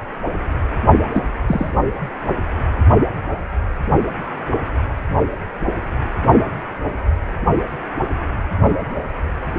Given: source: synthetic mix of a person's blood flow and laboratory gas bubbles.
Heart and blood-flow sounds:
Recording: Doppler ultrasound of blood flow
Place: precordium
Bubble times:
1.14-1.22 s: bubbles
1.47-1.74 s: bubbles
From the record:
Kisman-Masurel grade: 113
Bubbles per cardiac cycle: 1 to 2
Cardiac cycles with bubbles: 1 to 10%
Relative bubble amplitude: loud (0.450 to 0.775)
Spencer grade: 1 (occasional bubble signal discernible with the cardiac motion signal, with majority of cardiac periods free of bubbles)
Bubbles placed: anywhere in the cardiac cycle

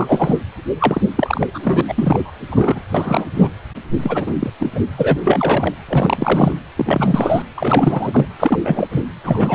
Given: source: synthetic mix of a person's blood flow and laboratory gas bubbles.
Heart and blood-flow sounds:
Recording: Doppler ultrasound of blood flow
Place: precordium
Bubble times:
0.00-0.37 s: bubbles
0.78-1.02 s: bubbles
1.16-1.50 s: bubbles
1.54-1.81 s: bubbles
1.88-2.33 s: bubbles
2.52-2.81 s: bubbles
2.94-3.25 s: bubbles
3.36-3.50 s: bubbles
4.02-4.50 s: bubbles
4.59-4.71 s: bubbles
4.75-4.80 s: bubbles
4.97-5.19 s: bubbles
5.25-5.74 s: bubbles
5.88-6.59 s: bubbles
6.77-7.42 s: bubbles
7.57-8.26 s: bubbles
8.40-8.88 s: bubbles
8.91-9.03 s: bubbles
9.24-9.55 s: bubbles
From the record:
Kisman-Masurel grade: 343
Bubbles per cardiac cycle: rolling drumbeat, 9 or more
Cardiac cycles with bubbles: 100%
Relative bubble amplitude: loud (0.450 to 0.775)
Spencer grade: 3 (all of the cardiac periods contain showers or single bubble signals, but not dominating or overriding the cardiac motion signals)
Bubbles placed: anywhere in the cardiac cycle

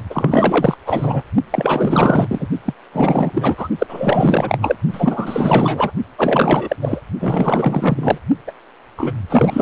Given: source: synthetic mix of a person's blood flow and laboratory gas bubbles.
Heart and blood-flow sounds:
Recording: Doppler ultrasound of blood flow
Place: precordium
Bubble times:
0.10-0.78 s: bubbles
0.86-1.24 s: bubbles
1.50-2.48 s: bubbles
2.65-2.73 s: bubbles
2.92-3.68 s: bubbles
3.78-4.76 s: bubbles
4.90-5.92 s: bubbles
6.18-6.76 s: bubbles
6.82-7.01 s: bubbles
7.20-8.18 s: bubbles
8.47-8.52 s: bubbles
8.96-9.14 s: bubbles
9.29-9.62 s: bubbles
From the record:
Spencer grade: 4 (maximum detectable bubble signal sounding continuously throughout systole and diastole of every cardiac period, and overriding the amplitude of the normal cardiac signals)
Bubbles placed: only in the low amplitude regions of the cardiac cycle

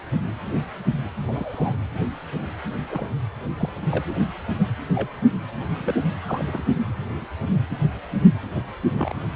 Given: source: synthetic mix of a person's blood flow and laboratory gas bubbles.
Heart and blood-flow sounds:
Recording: Doppler ultrasound of blood flow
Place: precordium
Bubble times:
1.28-1.75 s: bubbles
2.90-3.06 s: bubbles
3.57-3.69 s: bubbles
3.91-4.04 s: bubbles
4.95-5.08 s: bubbles
5.73-6.02 s: bubbles
6.25-6.64 s: bubbles
7.71-7.76 s: bubbles
8.51-8.62 s: bubbles
8.97-9.13 s: bubbles
From the record:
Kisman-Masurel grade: 121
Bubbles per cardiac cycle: 1 to 2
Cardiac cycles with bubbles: 10 to 50%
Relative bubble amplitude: barely perceptible (0.100 to 0.250)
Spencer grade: 2 (many but less than half of the cardiac periods contain bubble signals, singularly or in groups)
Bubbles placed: anywhere in the cardiac cycle

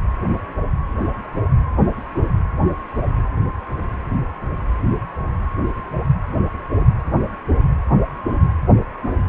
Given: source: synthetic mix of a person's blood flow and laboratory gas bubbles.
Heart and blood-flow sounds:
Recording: Doppler ultrasound of blood flow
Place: precordium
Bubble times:
no bubbles
From the record:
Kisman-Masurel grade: 000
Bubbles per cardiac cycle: 0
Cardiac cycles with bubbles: 0%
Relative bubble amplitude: no bubbles discernible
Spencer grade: 0 (complete lack of bubble signals)

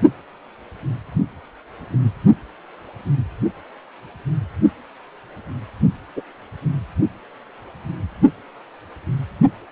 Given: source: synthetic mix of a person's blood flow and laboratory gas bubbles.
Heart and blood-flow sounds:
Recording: Doppler ultrasound of blood flow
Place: precordium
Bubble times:
6.16-6.21 s: bubbles
From the record:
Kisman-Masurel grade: 112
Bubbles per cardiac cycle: 1 to 2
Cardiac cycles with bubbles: 1 to 10%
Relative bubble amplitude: moderate (0.250 to 0.450)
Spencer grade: 1 (occasional bubble signal discernible with the cardiac motion signal, with majority of cardiac periods free of bubbles)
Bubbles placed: only in the low amplitude regions of the cardiac cycle

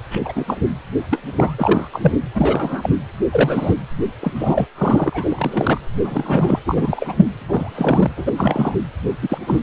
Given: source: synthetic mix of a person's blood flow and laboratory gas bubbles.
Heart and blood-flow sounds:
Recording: Doppler ultrasound of blood flow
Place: precordium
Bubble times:
0.11-0.19 s: bubbles
0.25-0.44 s: bubbles
0.47-0.57 s: bubbles
1.10-1.89 s: bubbles
1.93-2.15 s: bubbles
2.34-2.91 s: bubbles
3.31-3.75 s: bubbles
4.21-4.67 s: bubbles
4.75-5.81 s: bubbles
6.04-6.59 s: bubbles
6.65-7.27 s: bubbles
7.38-8.12 s: bubbles
8.16-8.75 s: bubbles
9.21-9.38 s: bubbles
9.47-9.61 s: bubbles
From the record:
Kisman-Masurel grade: 243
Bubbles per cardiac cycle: several, 3 to 8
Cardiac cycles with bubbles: 100%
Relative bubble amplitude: loud (0.450 to 0.775)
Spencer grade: 3 (all of the cardiac periods contain showers or single bubble signals, but not dominating or overriding the cardiac motion signals)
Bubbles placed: anywhere in the cardiac cycle

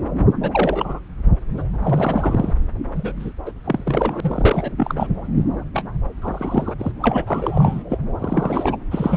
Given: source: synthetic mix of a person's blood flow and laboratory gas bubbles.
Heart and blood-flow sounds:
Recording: Doppler ultrasound of blood flow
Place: subclavian vein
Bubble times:
0.42-1.02 s: bubbles
1.57-1.62 s: bubbles
1.83-2.54 s: bubbles
2.95-3.33 s: bubbles
3.46-3.52 s: bubbles
3.64-4.73 s: bubbles
4.76-5.07 s: bubbles
5.73-5.83 s: bubbles
6.21-6.75 s: bubbles
6.78-6.92 s: bubbles
7.01-7.83 s: bubbles
7.89-7.98 s: bubbles
8.19-8.77 s: bubbles
8.91-9.17 s: bubbles
From the record:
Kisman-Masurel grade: 342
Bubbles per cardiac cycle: rolling drumbeat, 9 or more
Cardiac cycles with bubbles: 100%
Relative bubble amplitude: moderate (0.250 to 0.450)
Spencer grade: 3 (all of the cardiac periods contain showers or single bubble signals, but not dominating or overriding the cardiac motion signals)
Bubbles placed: anywhere in the cardiac cycle

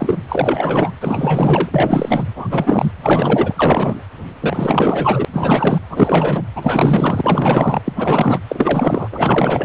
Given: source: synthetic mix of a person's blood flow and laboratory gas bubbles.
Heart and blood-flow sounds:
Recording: Doppler ultrasound of blood flow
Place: precordium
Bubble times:
0.00-0.19 s: bubbles
0.28-0.92 s: bubbles
1.01-1.69 s: bubbles
1.74-2.23 s: bubbles
2.35-2.92 s: bubbles
3.02-4.03 s: bubbles
4.40-5.25 s: bubbles
5.32-5.79 s: bubbles
5.89-6.43 s: bubbles
6.55-7.81 s: bubbles
7.84-7.92 s: bubbles
7.96-8.39 s: bubbles
8.48-9.08 s: bubbles
9.12-9.65 s: bubbles
From the record:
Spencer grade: 4 (maximum detectable bubble signal sounding continuously throughout systole and diastole of every cardiac period, and overriding the amplitude of the normal cardiac signals)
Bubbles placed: anywhere in the cardiac cycle

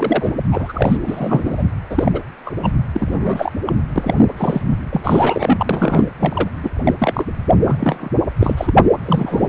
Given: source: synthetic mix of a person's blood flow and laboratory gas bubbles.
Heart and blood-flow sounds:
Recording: Doppler ultrasound of blood flow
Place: precordium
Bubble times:
0.00-0.33 s: bubbles
0.51-0.97 s: bubbles
1.06-1.63 s: bubbles
1.90-2.21 s: bubbles
2.46-2.54 s: bubbles
2.62-2.71 s: bubbles
2.94-3.52 s: bubbles
3.66-3.73 s: bubbles
3.96-4.14 s: bubbles
4.37-4.62 s: bubbles
4.69-4.76 s: bubbles
4.90-5.67 s: bubbles
5.69-6.08 s: bubbles
6.20-6.49 s: bubbles
6.63-6.71 s: bubbles
6.84-6.95 s: bubbles
6.98-7.25 s: bubbles
7.62-8.10 s: bubbles
8.38-8.74 s: bubbles
9.06-9.49 s: bubbles
From the record:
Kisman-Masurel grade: 243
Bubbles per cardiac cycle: several, 3 to 8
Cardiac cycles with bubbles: 100%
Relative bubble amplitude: loud (0.450 to 0.775)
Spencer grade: 3 (all of the cardiac periods contain showers or single bubble signals, but not dominating or overriding the cardiac motion signals)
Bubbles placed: anywhere in the cardiac cycle

